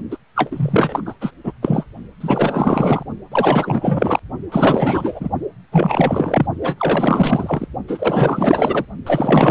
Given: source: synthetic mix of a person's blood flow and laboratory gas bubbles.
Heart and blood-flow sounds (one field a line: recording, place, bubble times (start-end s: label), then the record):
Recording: Doppler ultrasound of blood flow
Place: precordium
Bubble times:
0.10-0.17 s: bubbles
0.35-1.14 s: bubbles
1.21-1.31 s: bubbles
1.44-1.52 s: bubbles
1.62-1.85 s: bubbles
2.20-3.04 s: bubbles
3.31-4.20 s: bubbles
4.51-5.29 s: bubbles
5.71-6.46 s: bubbles
6.61-6.75 s: bubbles
6.78-7.67 s: bubbles
7.88-8.85 s: bubbles
9.06-9.51 s: bubbles
From the record:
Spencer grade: 4 (maximum detectable bubble signal sounding continuously throughout systole and diastole of every cardiac period, and overriding the amplitude of the normal cardiac signals)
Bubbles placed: only in the low amplitude regions of the cardiac cycle